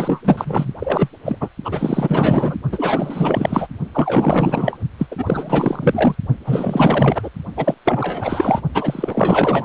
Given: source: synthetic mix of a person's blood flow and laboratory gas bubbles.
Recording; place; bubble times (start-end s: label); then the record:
Doppler ultrasound of blood flow; precordium
0.00-0.21 s: bubbles
0.24-0.72 s: bubbles
0.79-1.08 s: bubbles
1.25-1.49 s: bubbles
1.64-2.56 s: bubbles
2.72-3.68 s: bubbles
3.94-4.79 s: bubbles
4.99-5.07 s: bubbles
5.11-6.15 s: bubbles
6.45-7.30 s: bubbles
7.56-7.75 s: bubbles
7.84-8.60 s: bubbles
8.74-9.64 s: bubbles
From the record:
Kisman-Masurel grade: 444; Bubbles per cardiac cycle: continuous sound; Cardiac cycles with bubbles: 100%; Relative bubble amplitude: maximal (0.775 to 0.999); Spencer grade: 4 (maximum detectable bubble signal sounding continuously throughout systole and diastole of every cardiac period, and overriding the amplitude of the normal cardiac signals); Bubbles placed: only in the low amplitude regions of the cardiac cycle